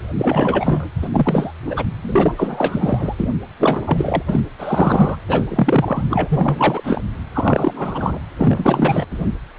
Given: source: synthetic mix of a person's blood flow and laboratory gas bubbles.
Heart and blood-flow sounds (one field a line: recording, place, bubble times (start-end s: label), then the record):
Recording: Doppler ultrasound of blood flow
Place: precordium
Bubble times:
0.18-0.91 s: bubbles
1.02-1.08 s: bubbles
1.12-1.51 s: bubbles
1.67-1.85 s: bubbles
2.02-3.29 s: bubbles
3.59-4.22 s: bubbles
4.27-4.40 s: bubbles
4.58-5.16 s: bubbles
5.28-7.01 s: bubbles
7.33-8.19 s: bubbles
8.37-9.05 s: bubbles
9.11-9.31 s: bubbles
From the record:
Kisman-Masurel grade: 343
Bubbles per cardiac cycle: rolling drumbeat, 9 or more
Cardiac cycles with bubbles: 100%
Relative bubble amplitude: loud (0.450 to 0.775)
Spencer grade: 3 (all of the cardiac periods contain showers or single bubble signals, but not dominating or overriding the cardiac motion signals)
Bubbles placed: anywhere in the cardiac cycle